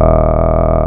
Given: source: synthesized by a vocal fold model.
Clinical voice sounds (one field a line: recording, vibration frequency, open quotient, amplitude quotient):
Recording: sustained vowel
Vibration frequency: 40 Hz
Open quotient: 0.5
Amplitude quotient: 1.3